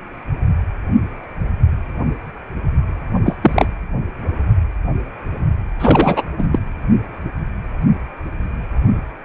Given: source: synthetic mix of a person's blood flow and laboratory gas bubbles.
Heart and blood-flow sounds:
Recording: Doppler ultrasound of blood flow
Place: precordium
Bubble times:
3.25-3.37 s: bubbles
3.42-3.66 s: bubbles
5.79-6.23 s: bubbles
6.38-6.47 s: bubbles
6.51-6.59 s: bubbles
From the record:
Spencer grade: 2 (many but less than half of the cardiac periods contain bubble signals, singularly or in groups)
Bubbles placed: anywhere in the cardiac cycle

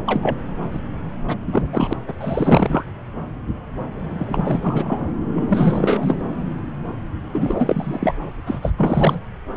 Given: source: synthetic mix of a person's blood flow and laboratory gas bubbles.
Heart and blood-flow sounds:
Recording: Doppler ultrasound of blood flow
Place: subclavian vein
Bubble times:
0.06-0.38 s: bubbles
0.72-0.79 s: bubbles
1.27-1.36 s: bubbles
1.46-1.62 s: bubbles
1.72-1.93 s: bubbles
2.07-2.13 s: bubbles
2.21-2.83 s: bubbles
4.18-5.00 s: bubbles
5.34-6.19 s: bubbles
7.33-8.12 s: bubbles
8.46-8.71 s: bubbles
8.77-9.20 s: bubbles
9.54-9.56 s: bubbles
From the record:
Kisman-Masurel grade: 333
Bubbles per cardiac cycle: rolling drumbeat, 9 or more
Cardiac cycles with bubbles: 50 to 99%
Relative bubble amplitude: loud (0.450 to 0.775)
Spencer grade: 3 (all of the cardiac periods contain showers or single bubble signals, but not dominating or overriding the cardiac motion signals)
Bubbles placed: anywhere in the cardiac cycle

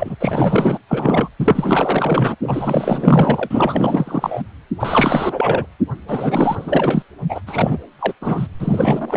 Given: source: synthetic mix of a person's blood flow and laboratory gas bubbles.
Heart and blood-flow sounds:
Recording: Doppler ultrasound of blood flow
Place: precordium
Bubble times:
0.00-0.16 s: bubbles
0.19-0.78 s: bubbles
0.89-1.28 s: bubbles
1.40-2.35 s: bubbles
2.42-4.42 s: bubbles
4.79-5.66 s: bubbles
6.08-7.02 s: bubbles
7.29-7.41 s: bubbles
7.46-7.79 s: bubbles
7.99-8.13 s: bubbles
8.21-8.47 s: bubbles
8.59-9.17 s: bubbles
From the record:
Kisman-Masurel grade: 444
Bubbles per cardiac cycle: continuous sound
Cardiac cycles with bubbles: 100%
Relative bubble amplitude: maximal (0.775 to 0.999)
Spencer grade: 4 (maximum detectable bubble signal sounding continuously throughout systole and diastole of every cardiac period, and overriding the amplitude of the normal cardiac signals)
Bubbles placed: anywhere in the cardiac cycle

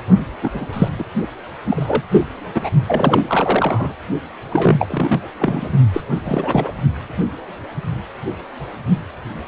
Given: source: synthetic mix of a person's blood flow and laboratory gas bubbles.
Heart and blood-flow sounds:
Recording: Doppler ultrasound of blood flow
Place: precordium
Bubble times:
0.42-0.50 s: bubbles
0.54-0.67 s: bubbles
0.72-0.89 s: bubbles
0.99-1.04 s: bubbles
1.64-2.02 s: bubbles
2.12-2.27 s: bubbles
2.54-2.71 s: bubbles
2.88-3.94 s: bubbles
4.50-5.20 s: bubbles
5.39-5.69 s: bubbles
5.93-6.01 s: bubbles
6.23-6.72 s: bubbles
From the record:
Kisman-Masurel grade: 232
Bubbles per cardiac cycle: several, 3 to 8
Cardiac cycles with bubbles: 50 to 99%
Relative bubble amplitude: moderate (0.250 to 0.450)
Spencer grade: 3 (all of the cardiac periods contain showers or single bubble signals, but not dominating or overriding the cardiac motion signals)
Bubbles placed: only in the low amplitude regions of the cardiac cycle

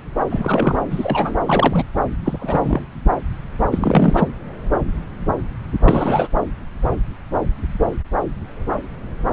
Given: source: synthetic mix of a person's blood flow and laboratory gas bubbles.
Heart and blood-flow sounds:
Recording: Doppler ultrasound of blood flow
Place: subclavian vein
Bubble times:
0.29-0.80 s: bubbles
0.90-1.35 s: bubbles
1.46-1.85 s: bubbles
2.23-2.80 s: bubbles
3.71-4.28 s: bubbles
5.86-6.27 s: bubbles
From the record:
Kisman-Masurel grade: 222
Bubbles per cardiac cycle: several, 3 to 8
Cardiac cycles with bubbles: 10 to 50%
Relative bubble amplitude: moderate (0.250 to 0.450)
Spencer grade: 2 (many but less than half of the cardiac periods contain bubble signals, singularly or in groups)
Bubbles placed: anywhere in the cardiac cycle

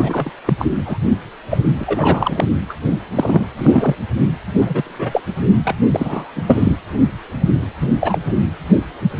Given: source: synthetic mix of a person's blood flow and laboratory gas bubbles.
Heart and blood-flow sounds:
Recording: Doppler ultrasound of blood flow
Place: precordium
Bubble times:
0.00-0.31 s: bubbles
0.45-0.53 s: bubbles
0.58-0.66 s: bubbles
0.85-0.98 s: bubbles
1.49-1.58 s: bubbles
1.80-2.46 s: bubbles
2.68-2.74 s: bubbles
3.14-3.46 s: bubbles
3.58-3.95 s: bubbles
4.54-5.21 s: bubbles
5.64-5.75 s: bubbles
5.91-6.32 s: bubbles
6.36-6.42 s: bubbles
6.46-6.78 s: bubbles
7.80-7.88 s: bubbles
8.00-8.20 s: bubbles
8.27-8.33 s: bubbles
From the record:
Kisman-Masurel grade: 233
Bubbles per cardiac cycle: several, 3 to 8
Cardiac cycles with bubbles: 50 to 99%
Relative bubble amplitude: loud (0.450 to 0.775)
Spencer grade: 3 (all of the cardiac periods contain showers or single bubble signals, but not dominating or overriding the cardiac motion signals)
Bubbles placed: anywhere in the cardiac cycle

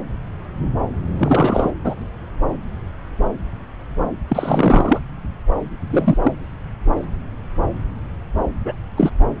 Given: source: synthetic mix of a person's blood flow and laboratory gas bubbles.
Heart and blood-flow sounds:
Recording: Doppler ultrasound of blood flow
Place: subclavian vein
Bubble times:
1.18-1.72 s: bubbles
1.84-1.95 s: bubbles
4.28-5.00 s: bubbles
5.90-6.17 s: bubbles
6.22-6.33 s: bubbles
8.65-8.73 s: bubbles
8.97-9.11 s: bubbles
From the record:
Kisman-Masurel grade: 223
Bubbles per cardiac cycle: several, 3 to 8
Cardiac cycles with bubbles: 10 to 50%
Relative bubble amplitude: loud (0.450 to 0.775)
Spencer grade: 2 (many but less than half of the cardiac periods contain bubble signals, singularly or in groups)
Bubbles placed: anywhere in the cardiac cycle

